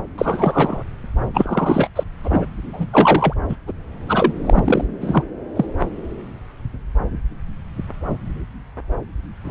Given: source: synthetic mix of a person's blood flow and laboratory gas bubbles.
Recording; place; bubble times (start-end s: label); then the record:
Doppler ultrasound of blood flow; subclavian vein
0.18-0.84 s: bubbles
1.33-1.88 s: bubbles
1.96-2.04 s: bubbles
2.23-2.45 s: bubbles
2.73-2.87 s: bubbles
2.93-3.34 s: bubbles
3.49-3.56 s: bubbles
3.67-3.73 s: bubbles
4.08-4.32 s: bubbles
4.45-4.84 s: bubbles
5.00-5.24 s: bubbles
5.55-5.66 s: bubbles
5.79-5.85 s: bubbles
9.45-9.51 s: bubbles
From the record:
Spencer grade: 3 (all of the cardiac periods contain showers or single bubble signals, but not dominating or overriding the cardiac motion signals); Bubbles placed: anywhere in the cardiac cycle